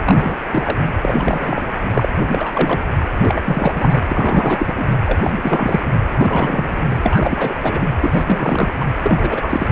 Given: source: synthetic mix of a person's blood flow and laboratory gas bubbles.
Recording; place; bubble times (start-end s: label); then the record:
Doppler ultrasound of blood flow; precordium
0.05-0.39 s: bubbles
0.51-0.78 s: bubbles
1.02-1.67 s: bubbles
1.90-2.08 s: bubbles
2.24-2.51 s: bubbles
2.53-2.80 s: bubbles
3.21-4.02 s: bubbles
4.08-4.88 s: bubbles
5.05-5.20 s: bubbles
5.23-5.31 s: bubbles
5.43-5.83 s: bubbles
6.08-6.84 s: bubbles
6.90-6.95 s: bubbles
7.03-7.54 s: bubbles
7.62-7.88 s: bubbles
8.00-8.68 s: bubbles
8.79-8.89 s: bubbles
9.03-9.72 s: bubbles
From the record:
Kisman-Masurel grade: 343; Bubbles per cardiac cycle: rolling drumbeat, 9 or more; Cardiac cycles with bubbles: 100%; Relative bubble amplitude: loud (0.450 to 0.775); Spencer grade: 3 (all of the cardiac periods contain showers or single bubble signals, but not dominating or overriding the cardiac motion signals); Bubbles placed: anywhere in the cardiac cycle